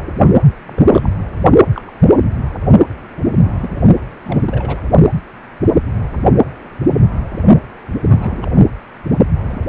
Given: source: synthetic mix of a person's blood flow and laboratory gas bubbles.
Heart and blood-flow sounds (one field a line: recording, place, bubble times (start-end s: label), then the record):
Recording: Doppler ultrasound of blood flow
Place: precordium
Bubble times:
0.66-1.09 s: bubbles
1.74-1.81 s: bubbles
1.87-1.91 s: bubbles
2.06-2.14 s: bubbles
3.42-3.57 s: bubbles
3.61-3.86 s: bubbles
4.23-4.81 s: bubbles
8.06-8.46 s: bubbles
8.55-8.61 s: bubbles
9.46-9.69 s: bubbles
From the record:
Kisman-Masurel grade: 232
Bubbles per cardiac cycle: several, 3 to 8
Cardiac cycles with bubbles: 50 to 99%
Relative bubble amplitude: moderate (0.250 to 0.450)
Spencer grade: 3 (all of the cardiac periods contain showers or single bubble signals, but not dominating or overriding the cardiac motion signals)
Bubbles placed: only in the low amplitude regions of the cardiac cycle